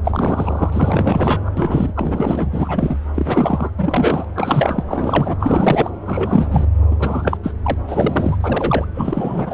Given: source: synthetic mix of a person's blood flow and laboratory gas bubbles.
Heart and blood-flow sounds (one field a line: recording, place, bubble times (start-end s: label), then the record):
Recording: Doppler ultrasound of blood flow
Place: subclavian vein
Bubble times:
0.03-1.50 s: bubbles
1.57-2.48 s: bubbles
2.52-2.99 s: bubbles
3.15-3.71 s: bubbles
3.77-4.25 s: bubbles
4.35-4.83 s: bubbles
4.88-5.36 s: bubbles
5.40-5.91 s: bubbles
6.05-6.66 s: bubbles
6.91-6.96 s: bubbles
6.99-7.38 s: bubbles
7.43-7.54 s: bubbles
7.63-7.74 s: bubbles
7.88-8.85 s: bubbles
8.95-9.54 s: bubbles
From the record:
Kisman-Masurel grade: 343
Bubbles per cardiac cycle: rolling drumbeat, 9 or more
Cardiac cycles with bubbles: 100%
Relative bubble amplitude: loud (0.450 to 0.775)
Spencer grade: 3 (all of the cardiac periods contain showers or single bubble signals, but not dominating or overriding the cardiac motion signals)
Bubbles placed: anywhere in the cardiac cycle